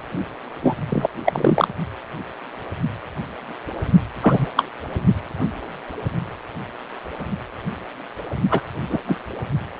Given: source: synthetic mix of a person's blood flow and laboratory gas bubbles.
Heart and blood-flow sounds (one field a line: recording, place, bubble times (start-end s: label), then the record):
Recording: Doppler ultrasound of blood flow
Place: precordium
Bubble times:
0.62-0.75 s: bubbles
0.90-1.07 s: bubbles
1.25-1.68 s: bubbles
4.22-4.49 s: bubbles
4.56-4.65 s: bubbles
8.51-8.61 s: bubbles
8.89-8.99 s: bubbles
9.06-9.18 s: bubbles
From the record:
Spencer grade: 2 (many but less than half of the cardiac periods contain bubble signals, singularly or in groups)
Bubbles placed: only in the low amplitude regions of the cardiac cycle